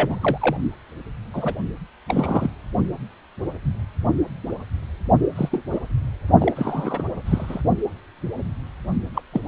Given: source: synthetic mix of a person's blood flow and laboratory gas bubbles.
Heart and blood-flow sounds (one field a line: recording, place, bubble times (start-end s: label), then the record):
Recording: Doppler ultrasound of blood flow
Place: precordium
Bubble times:
0.00-0.57 s: bubbles
1.33-1.54 s: bubbles
2.07-2.50 s: bubbles
5.35-5.60 s: bubbles
5.71-5.79 s: bubbles
6.39-7.04 s: bubbles
7.25-7.61 s: bubbles
9.14-9.21 s: bubbles
9.32-9.41 s: bubbles
From the record:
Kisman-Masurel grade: 232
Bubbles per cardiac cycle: several, 3 to 8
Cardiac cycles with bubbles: 50 to 99%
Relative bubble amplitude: moderate (0.250 to 0.450)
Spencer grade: 3 (all of the cardiac periods contain showers or single bubble signals, but not dominating or overriding the cardiac motion signals)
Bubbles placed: only in the low amplitude regions of the cardiac cycle